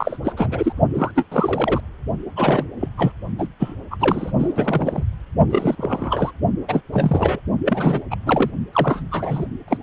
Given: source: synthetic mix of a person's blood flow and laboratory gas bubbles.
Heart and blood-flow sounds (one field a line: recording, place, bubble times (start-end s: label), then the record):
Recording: Doppler ultrasound of blood flow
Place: precordium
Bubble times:
0.00-0.17 s: bubbles
0.24-0.33 s: bubbles
0.36-0.73 s: bubbles
0.93-1.11 s: bubbles
1.15-1.25 s: bubbles
1.31-1.80 s: bubbles
2.36-2.66 s: bubbles
2.80-2.88 s: bubbles
2.98-3.12 s: bubbles
3.39-3.48 s: bubbles
3.60-3.75 s: bubbles
3.90-4.31 s: bubbles
4.38-5.03 s: bubbles
5.49-5.75 s: bubbles
5.77-6.31 s: bubbles
6.68-6.81 s: bubbles
6.92-7.40 s: bubbles
7.65-8.02 s: bubbles
8.10-8.16 s: bubbles
8.26-8.51 s: bubbles
8.72-9.02 s: bubbles
9.10-9.46 s: bubbles
9.68-9.78 s: bubbles
From the record:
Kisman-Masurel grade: 343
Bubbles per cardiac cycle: rolling drumbeat, 9 or more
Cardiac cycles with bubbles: 100%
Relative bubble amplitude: loud (0.450 to 0.775)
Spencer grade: 3 (all of the cardiac periods contain showers or single bubble signals, but not dominating or overriding the cardiac motion signals)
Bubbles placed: only in the low amplitude regions of the cardiac cycle